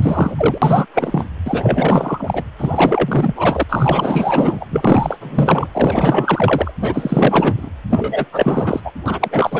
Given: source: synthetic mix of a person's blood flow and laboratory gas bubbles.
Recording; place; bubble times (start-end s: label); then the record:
Doppler ultrasound of blood flow; precordium
0.02-0.58 s: bubbles
0.61-0.86 s: bubbles
0.94-1.26 s: bubbles
1.46-2.44 s: bubbles
2.58-3.63 s: bubbles
3.69-4.65 s: bubbles
4.70-5.17 s: bubbles
5.21-5.67 s: bubbles
5.73-6.71 s: bubbles
6.81-7.70 s: bubbles
7.89-8.25 s: bubbles
8.32-8.80 s: bubbles
8.84-8.91 s: bubbles
9.05-9.60 s: bubbles
From the record:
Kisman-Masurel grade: 444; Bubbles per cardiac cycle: continuous sound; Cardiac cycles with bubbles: 100%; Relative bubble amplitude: maximal (0.775 to 0.999); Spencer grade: 4 (maximum detectable bubble signal sounding continuously throughout systole and diastole of every cardiac period, and overriding the amplitude of the normal cardiac signals); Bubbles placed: anywhere in the cardiac cycle